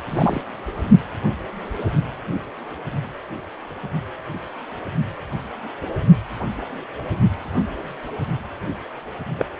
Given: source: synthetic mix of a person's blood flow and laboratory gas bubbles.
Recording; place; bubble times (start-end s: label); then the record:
Doppler ultrasound of blood flow; precordium
0.10-0.41 s: bubbles
9.38-9.45 s: bubbles
From the record:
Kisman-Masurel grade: 122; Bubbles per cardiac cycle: 1 to 2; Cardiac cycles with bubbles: 10 to 50%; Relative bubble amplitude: moderate (0.250 to 0.450); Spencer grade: 2 (many but less than half of the cardiac periods contain bubble signals, singularly or in groups); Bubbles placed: only in the low amplitude regions of the cardiac cycle